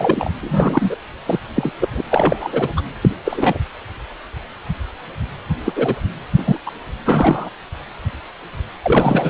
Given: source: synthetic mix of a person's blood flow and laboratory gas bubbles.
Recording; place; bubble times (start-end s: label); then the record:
Doppler ultrasound of blood flow; precordium
0.00-0.30 s: bubbles
0.40-0.96 s: bubbles
1.27-1.39 s: bubbles
1.56-1.71 s: bubbles
1.81-1.89 s: bubbles
1.92-2.02 s: bubbles
2.10-2.69 s: bubbles
2.77-2.82 s: bubbles
3.01-3.09 s: bubbles
3.25-3.58 s: bubbles
5.66-5.72 s: bubbles
5.75-5.95 s: bubbles
6.38-6.58 s: bubbles
6.66-6.71 s: bubbles
7.05-7.50 s: bubbles
8.82-9.30 s: bubbles
From the record:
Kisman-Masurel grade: 233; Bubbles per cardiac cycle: several, 3 to 8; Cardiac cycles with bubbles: 50 to 99%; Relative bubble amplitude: loud (0.450 to 0.775); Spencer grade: 3 (all of the cardiac periods contain showers or single bubble signals, but not dominating or overriding the cardiac motion signals); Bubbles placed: anywhere in the cardiac cycle